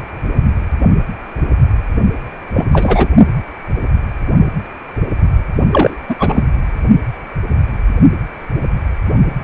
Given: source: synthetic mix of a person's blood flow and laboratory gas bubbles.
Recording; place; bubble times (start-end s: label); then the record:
Doppler ultrasound of blood flow; precordium
2.53-2.66 s: bubbles
2.71-3.08 s: bubbles
5.72-5.96 s: bubbles
6.09-6.15 s: bubbles
6.19-6.43 s: bubbles
From the record:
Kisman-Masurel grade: 223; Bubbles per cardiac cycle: several, 3 to 8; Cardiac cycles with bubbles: 10 to 50%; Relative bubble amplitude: loud (0.450 to 0.775); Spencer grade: 2 (many but less than half of the cardiac periods contain bubble signals, singularly or in groups); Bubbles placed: only in the low amplitude regions of the cardiac cycle